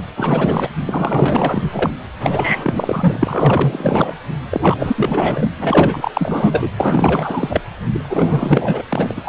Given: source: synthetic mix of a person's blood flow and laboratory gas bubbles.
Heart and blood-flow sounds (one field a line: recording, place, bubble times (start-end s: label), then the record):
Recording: Doppler ultrasound of blood flow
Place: precordium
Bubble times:
0.00-0.03 s: bubbles
0.16-0.68 s: bubbles
0.85-1.66 s: bubbles
1.72-1.91 s: bubbles
2.20-4.14 s: bubbles
4.50-5.54 s: bubbles
5.58-6.10 s: bubbles
6.13-6.70 s: bubbles
6.78-7.61 s: bubbles
7.92-8.82 s: bubbles
8.88-9.29 s: bubbles
From the record:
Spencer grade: 4 (maximum detectable bubble signal sounding continuously throughout systole and diastole of every cardiac period, and overriding the amplitude of the normal cardiac signals)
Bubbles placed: anywhere in the cardiac cycle